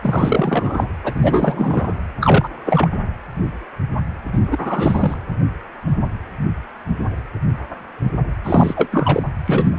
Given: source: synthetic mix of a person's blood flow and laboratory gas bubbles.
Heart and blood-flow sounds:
Doppler ultrasound of blood flow; precordium
0.02-0.89 s: bubbles
1.03-1.95 s: bubbles
2.21-2.48 s: bubbles
2.65-2.96 s: bubbles
4.33-4.38 s: bubbles
4.50-5.18 s: bubbles
8.44-8.88 s: bubbles
8.91-9.23 s: bubbles
9.46-9.79 s: bubbles
From the record:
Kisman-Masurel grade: 333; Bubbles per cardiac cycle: rolling drumbeat, 9 or more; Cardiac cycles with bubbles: 50 to 99%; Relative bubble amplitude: loud (0.450 to 0.775); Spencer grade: 3 (all of the cardiac periods contain showers or single bubble signals, but not dominating or overriding the cardiac motion signals); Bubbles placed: anywhere in the cardiac cycle

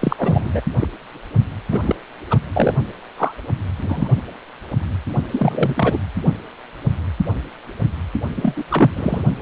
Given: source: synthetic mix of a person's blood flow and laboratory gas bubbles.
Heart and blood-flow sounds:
Doppler ultrasound of blood flow; precordium
0.00-0.61 s: bubbles
0.78-0.88 s: bubbles
1.71-1.81 s: bubbles
1.85-1.95 s: bubbles
2.30-2.39 s: bubbles
2.53-2.74 s: bubbles
3.18-3.32 s: bubbles
3.78-4.10 s: bubbles
5.33-5.99 s: bubbles
8.36-8.64 s: bubbles
8.70-8.90 s: bubbles
8.96-9.22 s: bubbles
From the record:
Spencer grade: 2 (many but less than half of the cardiac periods contain bubble signals, singularly or in groups); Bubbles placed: only in the low amplitude regions of the cardiac cycle

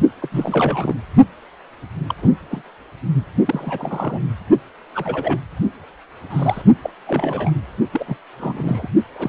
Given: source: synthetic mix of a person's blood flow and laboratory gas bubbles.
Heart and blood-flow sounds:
Doppler ultrasound of blood flow; precordium
0.20-0.29 s: bubbles
0.31-0.95 s: bubbles
2.08-2.15 s: bubbles
2.21-2.30 s: bubbles
2.50-2.61 s: bubbles
3.45-4.20 s: bubbles
4.94-5.40 s: bubbles
6.30-6.62 s: bubbles
6.83-6.90 s: bubbles
7.07-7.52 s: bubbles
7.92-8.17 s: bubbles
8.39-8.88 s: bubbles
9.14-9.29 s: bubbles
From the record:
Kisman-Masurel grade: 242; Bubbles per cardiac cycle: several, 3 to 8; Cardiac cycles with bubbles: 100%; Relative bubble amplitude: moderate (0.250 to 0.450); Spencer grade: 3 (all of the cardiac periods contain showers or single bubble signals, but not dominating or overriding the cardiac motion signals); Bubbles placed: only in the low amplitude regions of the cardiac cycle

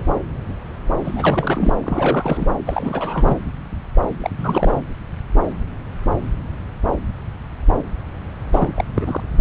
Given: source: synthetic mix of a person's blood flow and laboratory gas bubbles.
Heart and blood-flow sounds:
Doppler ultrasound of blood flow; subclavian vein
1.04-1.76 s: bubbles
1.83-2.47 s: bubbles
2.65-3.38 s: bubbles
4.21-4.30 s: bubbles
4.38-4.81 s: bubbles
8.53-8.85 s: bubbles
8.94-9.21 s: bubbles
9.38-9.41 s: bubbles
From the record:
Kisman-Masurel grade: 332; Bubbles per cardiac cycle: rolling drumbeat, 9 or more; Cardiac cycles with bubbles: 50 to 99%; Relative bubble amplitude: moderate (0.250 to 0.450); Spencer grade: 3 (all of the cardiac periods contain showers or single bubble signals, but not dominating or overriding the cardiac motion signals); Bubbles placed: anywhere in the cardiac cycle

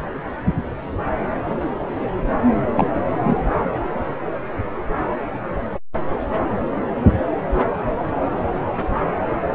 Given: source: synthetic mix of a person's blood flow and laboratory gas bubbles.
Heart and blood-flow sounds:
Doppler ultrasound of blood flow; subclavian vein
2.75-2.90 s: bubbles
3.23-3.38 s: bubbles
From the record:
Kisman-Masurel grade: 112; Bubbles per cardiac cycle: 1 to 2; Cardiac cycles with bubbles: 1 to 10%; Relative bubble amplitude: moderate (0.250 to 0.450); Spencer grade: 1 (occasional bubble signal discernible with the cardiac motion signal, with majority of cardiac periods free of bubbles); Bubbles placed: anywhere in the cardiac cycle

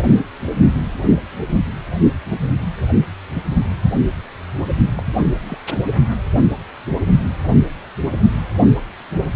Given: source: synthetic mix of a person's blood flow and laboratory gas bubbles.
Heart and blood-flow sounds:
Doppler ultrasound of blood flow; precordium
4.95-5.03 s: bubbles
5.16-5.34 s: bubbles
5.47-5.58 s: bubbles
5.70-5.77 s: bubbles
From the record:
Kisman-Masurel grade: 211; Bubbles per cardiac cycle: several, 3 to 8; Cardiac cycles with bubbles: 1 to 10%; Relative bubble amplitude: barely perceptible (0.100 to 0.250); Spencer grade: 1 (occasional bubble signal discernible with the cardiac motion signal, with majority of cardiac periods free of bubbles); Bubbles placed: only in the low amplitude regions of the cardiac cycle

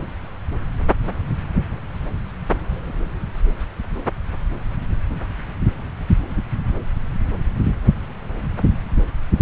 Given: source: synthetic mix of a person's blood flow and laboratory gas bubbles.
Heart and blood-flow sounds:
Doppler ultrasound of blood flow; subclavian vein
no bubbles
From the record:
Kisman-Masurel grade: 000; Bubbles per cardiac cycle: 0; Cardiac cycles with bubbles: 0%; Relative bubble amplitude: no bubbles discernible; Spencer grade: 0 (complete lack of bubble signals)

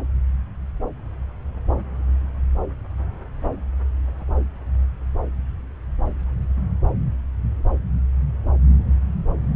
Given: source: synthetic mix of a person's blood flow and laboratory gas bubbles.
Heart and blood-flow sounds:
Doppler ultrasound of blood flow; subclavian vein
no bubbles
From the record:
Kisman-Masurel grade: 000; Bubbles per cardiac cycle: 0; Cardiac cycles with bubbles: 0%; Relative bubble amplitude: no bubbles discernible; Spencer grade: 0 (complete lack of bubble signals)

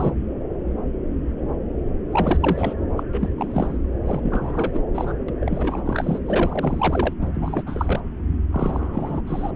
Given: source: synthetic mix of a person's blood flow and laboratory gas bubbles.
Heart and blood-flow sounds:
Doppler ultrasound of blood flow; subclavian vein
0.00-0.12 s: bubbles
2.12-2.74 s: bubbles
2.97-3.04 s: bubbles
3.13-3.29 s: bubbles
3.38-3.77 s: bubbles
4.06-4.83 s: bubbles
4.94-5.12 s: bubbles
5.28-5.32 s: bubbles
5.41-5.82 s: bubbles
5.84-6.19 s: bubbles
6.26-7.13 s: bubbles
7.21-7.29 s: bubbles
7.35-7.62 s: bubbles
7.67-8.00 s: bubbles
8.52-9.21 s: bubbles
9.27-9.51 s: bubbles
From the record:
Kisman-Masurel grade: 332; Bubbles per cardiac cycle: rolling drumbeat, 9 or more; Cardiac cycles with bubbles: 50 to 99%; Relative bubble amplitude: moderate (0.250 to 0.450); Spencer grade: 3 (all of the cardiac periods contain showers or single bubble signals, but not dominating or overriding the cardiac motion signals); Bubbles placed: anywhere in the cardiac cycle

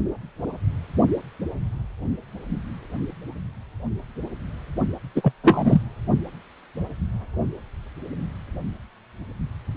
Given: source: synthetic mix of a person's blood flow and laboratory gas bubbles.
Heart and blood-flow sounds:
Doppler ultrasound of blood flow; precordium
5.15-5.32 s: bubbles
5.43-5.83 s: bubbles
From the record:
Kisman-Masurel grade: 213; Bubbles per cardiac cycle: several, 3 to 8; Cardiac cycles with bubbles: 1 to 10%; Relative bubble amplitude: loud (0.450 to 0.775); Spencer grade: 1 (occasional bubble signal discernible with the cardiac motion signal, with majority of cardiac periods free of bubbles); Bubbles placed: only in the low amplitude regions of the cardiac cycle

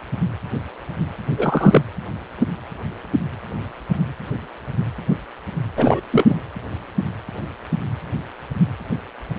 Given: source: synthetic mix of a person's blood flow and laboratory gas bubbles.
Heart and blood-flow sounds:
Doppler ultrasound of blood flow; precordium
1.37-1.81 s: bubbles
5.76-6.00 s: bubbles
6.11-6.35 s: bubbles
From the record:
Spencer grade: 1 (occasional bubble signal discernible with the cardiac motion signal, with majority of cardiac periods free of bubbles); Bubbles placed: anywhere in the cardiac cycle

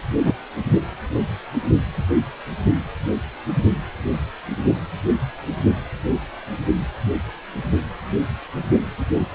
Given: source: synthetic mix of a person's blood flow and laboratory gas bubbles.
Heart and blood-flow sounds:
Doppler ultrasound of blood flow; precordium
0.23-0.32 s: bubbles
From the record:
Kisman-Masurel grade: 123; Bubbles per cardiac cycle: 1 to 2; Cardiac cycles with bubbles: 10 to 50%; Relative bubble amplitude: loud (0.450 to 0.775); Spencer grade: 2 (many but less than half of the cardiac periods contain bubble signals, singularly or in groups); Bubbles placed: only in the low amplitude regions of the cardiac cycle

